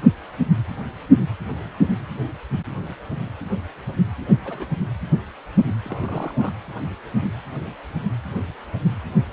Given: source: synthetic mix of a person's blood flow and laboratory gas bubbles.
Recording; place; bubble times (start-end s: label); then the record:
Doppler ultrasound of blood flow; precordium
4.19-4.25 s: bubbles
4.29-4.36 s: bubbles
4.45-4.67 s: bubbles
5.84-6.53 s: bubbles
From the record:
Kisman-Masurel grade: 221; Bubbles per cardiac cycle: several, 3 to 8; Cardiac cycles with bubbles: 10 to 50%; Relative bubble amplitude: barely perceptible (0.100 to 0.250); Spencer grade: 2 (many but less than half of the cardiac periods contain bubble signals, singularly or in groups); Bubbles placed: anywhere in the cardiac cycle